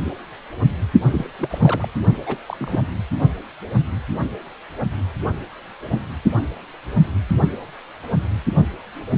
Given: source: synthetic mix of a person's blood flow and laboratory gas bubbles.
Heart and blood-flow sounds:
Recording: Doppler ultrasound of blood flow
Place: precordium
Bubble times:
1.11-1.28 s: bubbles
1.39-1.89 s: bubbles
2.26-2.38 s: bubbles
2.48-2.97 s: bubbles
3.12-3.17 s: bubbles
From the record:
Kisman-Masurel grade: 221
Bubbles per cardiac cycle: several, 3 to 8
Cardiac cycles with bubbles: 10 to 50%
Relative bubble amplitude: barely perceptible (0.100 to 0.250)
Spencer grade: 2 (many but less than half of the cardiac periods contain bubble signals, singularly or in groups)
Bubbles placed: only in the low amplitude regions of the cardiac cycle

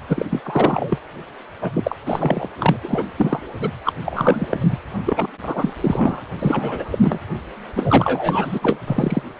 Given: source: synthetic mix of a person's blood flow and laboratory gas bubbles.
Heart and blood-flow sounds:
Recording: Doppler ultrasound of blood flow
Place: precordium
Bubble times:
0.08-0.26 s: bubbles
0.29-0.41 s: bubbles
0.43-0.98 s: bubbles
1.61-1.96 s: bubbles
2.06-2.48 s: bubbles
2.59-2.77 s: bubbles
2.83-3.04 s: bubbles
3.17-3.41 s: bubbles
3.61-3.69 s: bubbles
3.84-3.93 s: bubbles
4.05-4.77 s: bubbles
5.05-5.27 s: bubbles
5.42-5.74 s: bubbles
5.80-6.23 s: bubbles
6.38-7.19 s: bubbles
7.74-8.59 s: bubbles
8.62-8.78 s: bubbles
8.87-9.22 s: bubbles
From the record:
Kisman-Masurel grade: 343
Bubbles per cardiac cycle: rolling drumbeat, 9 or more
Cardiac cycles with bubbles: 100%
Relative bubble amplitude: loud (0.450 to 0.775)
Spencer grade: 3 (all of the cardiac periods contain showers or single bubble signals, but not dominating or overriding the cardiac motion signals)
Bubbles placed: anywhere in the cardiac cycle

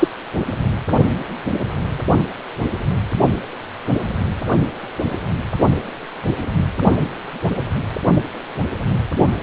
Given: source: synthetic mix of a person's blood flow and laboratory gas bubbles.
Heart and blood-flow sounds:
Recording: Doppler ultrasound of blood flow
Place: precordium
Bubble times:
0.00-0.08 s: bubbles
From the record:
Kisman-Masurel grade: 123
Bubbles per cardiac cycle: 1 to 2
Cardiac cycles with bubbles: 10 to 50%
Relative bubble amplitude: loud (0.450 to 0.775)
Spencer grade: 2 (many but less than half of the cardiac periods contain bubble signals, singularly or in groups)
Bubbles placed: only in the low amplitude regions of the cardiac cycle

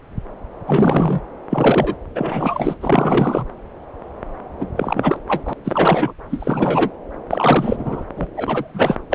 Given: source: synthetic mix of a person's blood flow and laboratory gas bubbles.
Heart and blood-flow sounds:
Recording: Doppler ultrasound of blood flow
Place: subclavian vein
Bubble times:
0.68-1.22 s: bubbles
1.50-1.95 s: bubbles
2.15-2.74 s: bubbles
2.81-3.46 s: bubbles
4.58-4.67 s: bubbles
4.76-5.19 s: bubbles
5.28-5.54 s: bubbles
5.65-6.13 s: bubbles
6.30-6.92 s: bubbles
7.30-8.04 s: bubbles
8.17-8.27 s: bubbles
8.36-8.97 s: bubbles
9.10-9.14 s: bubbles
From the record:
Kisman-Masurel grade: 332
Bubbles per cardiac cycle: rolling drumbeat, 9 or more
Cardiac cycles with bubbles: 50 to 99%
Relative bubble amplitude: moderate (0.250 to 0.450)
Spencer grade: 3 (all of the cardiac periods contain showers or single bubble signals, but not dominating or overriding the cardiac motion signals)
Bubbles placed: anywhere in the cardiac cycle

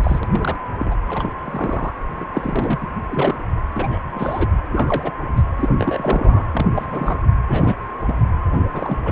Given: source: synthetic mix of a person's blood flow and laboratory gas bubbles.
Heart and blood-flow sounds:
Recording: Doppler ultrasound of blood flow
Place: precordium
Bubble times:
0.03-0.20 s: bubbles
0.23-0.27 s: bubbles
0.30-0.56 s: bubbles
0.80-0.95 s: bubbles
1.08-1.29 s: bubbles
1.44-1.93 s: bubbles
2.20-2.25 s: bubbles
2.33-2.87 s: bubbles
3.09-3.34 s: bubbles
3.75-3.99 s: bubbles
4.14-4.48 s: bubbles
4.72-5.11 s: bubbles
5.36-5.43 s: bubbles
5.57-5.73 s: bubbles
5.79-6.44 s: bubbles
6.52-6.66 s: bubbles
6.75-6.86 s: bubbles
6.90-7.19 s: bubbles
7.47-7.75 s: bubbles
8.00-8.14 s: bubbles
8.58-8.66 s: bubbles
8.70-8.97 s: bubbles
9.05-9.11 s: bubbles
From the record:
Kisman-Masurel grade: 242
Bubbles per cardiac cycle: several, 3 to 8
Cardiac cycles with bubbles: 100%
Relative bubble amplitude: moderate (0.250 to 0.450)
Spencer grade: 3 (all of the cardiac periods contain showers or single bubble signals, but not dominating or overriding the cardiac motion signals)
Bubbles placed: anywhere in the cardiac cycle

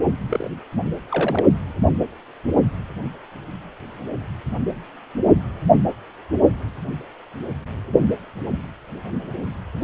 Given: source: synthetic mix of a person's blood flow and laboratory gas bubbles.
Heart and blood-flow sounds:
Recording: Doppler ultrasound of blood flow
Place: precordium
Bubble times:
0.29-0.51 s: bubbles
1.09-1.45 s: bubbles
From the record:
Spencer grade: 1 (occasional bubble signal discernible with the cardiac motion signal, with majority of cardiac periods free of bubbles)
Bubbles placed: only in the low amplitude regions of the cardiac cycle

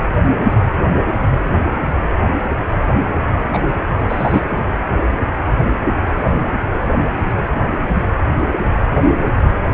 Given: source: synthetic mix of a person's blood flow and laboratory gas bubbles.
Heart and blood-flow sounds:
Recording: Doppler ultrasound of blood flow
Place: precordium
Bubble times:
3.53-3.62 s: bubbles
4.08-4.42 s: bubbles
From the record:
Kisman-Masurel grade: 113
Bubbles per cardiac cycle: 1 to 2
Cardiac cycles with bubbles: 1 to 10%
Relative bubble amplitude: loud (0.450 to 0.775)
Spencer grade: 1 (occasional bubble signal discernible with the cardiac motion signal, with majority of cardiac periods free of bubbles)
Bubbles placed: anywhere in the cardiac cycle

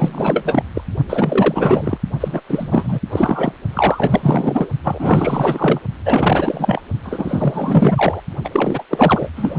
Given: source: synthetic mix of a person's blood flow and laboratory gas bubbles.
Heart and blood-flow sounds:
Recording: Doppler ultrasound of blood flow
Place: precordium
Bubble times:
0.00-0.63 s: bubbles
0.74-0.82 s: bubbles
1.09-1.98 s: bubbles
2.20-2.41 s: bubbles
2.48-3.00 s: bubbles
3.10-3.52 s: bubbles
3.70-4.70 s: bubbles
4.83-5.79 s: bubbles
6.05-6.81 s: bubbles
7.03-8.21 s: bubbles
8.44-8.50 s: bubbles
8.52-8.84 s: bubbles
8.90-9.29 s: bubbles
9.36-9.55 s: bubbles
From the record:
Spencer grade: 4 (maximum detectable bubble signal sounding continuously throughout systole and diastole of every cardiac period, and overriding the amplitude of the normal cardiac signals)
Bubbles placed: only in the low amplitude regions of the cardiac cycle

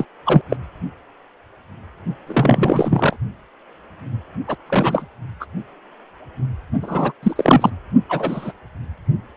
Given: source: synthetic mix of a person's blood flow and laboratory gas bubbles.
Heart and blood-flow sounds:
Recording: Doppler ultrasound of blood flow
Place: precordium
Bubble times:
0.00-0.05 s: bubbles
0.26-0.42 s: bubbles
0.50-0.56 s: bubbles
2.26-3.17 s: bubbles
4.47-4.56 s: bubbles
4.67-5.08 s: bubbles
5.40-5.46 s: bubbles
6.81-7.12 s: bubbles
7.22-7.70 s: bubbles
8.08-8.52 s: bubbles
From the record:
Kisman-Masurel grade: 223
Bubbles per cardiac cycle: several, 3 to 8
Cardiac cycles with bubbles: 10 to 50%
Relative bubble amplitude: loud (0.450 to 0.775)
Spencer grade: 2 (many but less than half of the cardiac periods contain bubble signals, singularly or in groups)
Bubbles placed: only in the low amplitude regions of the cardiac cycle

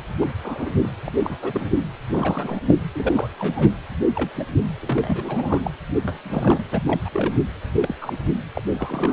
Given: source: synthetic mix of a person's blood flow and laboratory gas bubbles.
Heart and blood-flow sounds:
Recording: Doppler ultrasound of blood flow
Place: precordium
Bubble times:
0.20-0.30 s: bubbles
0.42-0.70 s: bubbles
0.79-0.89 s: bubbles
1.04-1.12 s: bubbles
1.19-1.38 s: bubbles
1.42-1.69 s: bubbles
2.11-2.59 s: bubbles
2.67-2.74 s: bubbles
2.95-3.28 s: bubbles
3.39-3.73 s: bubbles
4.15-4.29 s: bubbles
4.36-4.45 s: bubbles
4.82-5.71 s: bubbles
6.03-6.64 s: bubbles
6.71-6.83 s: bubbles
6.87-7.01 s: bubbles
7.04-7.10 s: bubbles
7.12-7.33 s: bubbles
7.80-7.95 s: bubbles
8.00-8.13 s: bubbles
8.55-8.63 s: bubbles
8.72-9.13 s: bubbles
From the record:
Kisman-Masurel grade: 242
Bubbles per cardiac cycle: several, 3 to 8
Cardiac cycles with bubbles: 100%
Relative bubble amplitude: moderate (0.250 to 0.450)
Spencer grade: 3 (all of the cardiac periods contain showers or single bubble signals, but not dominating or overriding the cardiac motion signals)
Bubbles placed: anywhere in the cardiac cycle

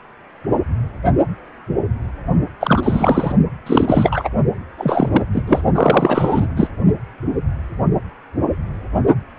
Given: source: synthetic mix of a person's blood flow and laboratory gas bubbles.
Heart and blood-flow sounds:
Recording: Doppler ultrasound of blood flow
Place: precordium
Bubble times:
2.60-3.36 s: bubbles
3.66-4.29 s: bubbles
4.77-5.25 s: bubbles
5.33-5.43 s: bubbles
5.47-5.61 s: bubbles
5.75-6.47 s: bubbles
6.56-6.70 s: bubbles
From the record:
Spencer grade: 3 (all of the cardiac periods contain showers or single bubble signals, but not dominating or overriding the cardiac motion signals)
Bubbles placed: only in the low amplitude regions of the cardiac cycle

